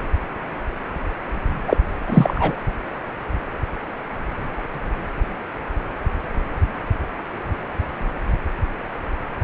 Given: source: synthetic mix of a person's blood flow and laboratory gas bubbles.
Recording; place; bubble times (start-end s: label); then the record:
Doppler ultrasound of blood flow; precordium
1.67-1.77 s: bubbles
2.07-2.56 s: bubbles
From the record:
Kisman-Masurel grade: 213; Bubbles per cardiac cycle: several, 3 to 8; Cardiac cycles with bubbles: 1 to 10%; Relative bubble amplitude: loud (0.450 to 0.775); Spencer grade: 1 (occasional bubble signal discernible with the cardiac motion signal, with majority of cardiac periods free of bubbles); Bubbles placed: anywhere in the cardiac cycle